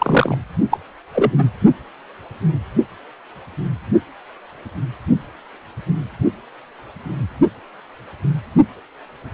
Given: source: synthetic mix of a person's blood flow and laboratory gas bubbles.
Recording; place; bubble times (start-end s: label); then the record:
Doppler ultrasound of blood flow; precordium
0.00-0.38 s: bubbles
0.71-0.78 s: bubbles
1.14-1.31 s: bubbles
1.38-1.44 s: bubbles
From the record:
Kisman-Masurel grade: 213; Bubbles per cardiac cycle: several, 3 to 8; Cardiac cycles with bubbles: 1 to 10%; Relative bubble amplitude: loud (0.450 to 0.775); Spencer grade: 1 (occasional bubble signal discernible with the cardiac motion signal, with majority of cardiac periods free of bubbles); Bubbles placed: only in the low amplitude regions of the cardiac cycle